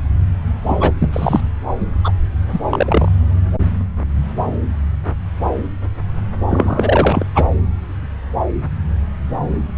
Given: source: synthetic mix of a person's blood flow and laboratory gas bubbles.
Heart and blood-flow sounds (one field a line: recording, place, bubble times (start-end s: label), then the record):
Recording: Doppler ultrasound of blood flow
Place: subclavian vein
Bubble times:
0.67-0.92 s: bubbles
1.00-1.41 s: bubbles
2.04-2.12 s: bubbles
2.52-2.60 s: bubbles
2.69-3.12 s: bubbles
6.49-7.25 s: bubbles
7.34-7.46 s: bubbles
From the record:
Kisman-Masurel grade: 223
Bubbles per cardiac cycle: several, 3 to 8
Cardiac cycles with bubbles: 10 to 50%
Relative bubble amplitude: loud (0.450 to 0.775)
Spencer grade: 2 (many but less than half of the cardiac periods contain bubble signals, singularly or in groups)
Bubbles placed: anywhere in the cardiac cycle